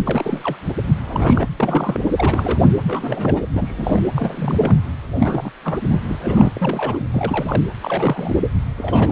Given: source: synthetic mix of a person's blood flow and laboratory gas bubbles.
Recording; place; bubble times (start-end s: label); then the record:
Doppler ultrasound of blood flow; precordium
0.06-0.56 s: bubbles
1.07-1.46 s: bubbles
1.58-2.00 s: bubbles
2.17-2.65 s: bubbles
2.86-3.50 s: bubbles
3.53-4.02 s: bubbles
4.16-4.77 s: bubbles
5.16-5.50 s: bubbles
5.62-5.79 s: bubbles
5.92-5.99 s: bubbles
6.08-6.53 s: bubbles
6.57-7.05 s: bubbles
7.12-7.62 s: bubbles
7.82-8.43 s: bubbles
8.77-9.12 s: bubbles
From the record:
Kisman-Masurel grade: 332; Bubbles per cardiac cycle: rolling drumbeat, 9 or more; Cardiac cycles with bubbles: 50 to 99%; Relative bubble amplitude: moderate (0.250 to 0.450); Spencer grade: 3 (all of the cardiac periods contain showers or single bubble signals, but not dominating or overriding the cardiac motion signals); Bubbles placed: anywhere in the cardiac cycle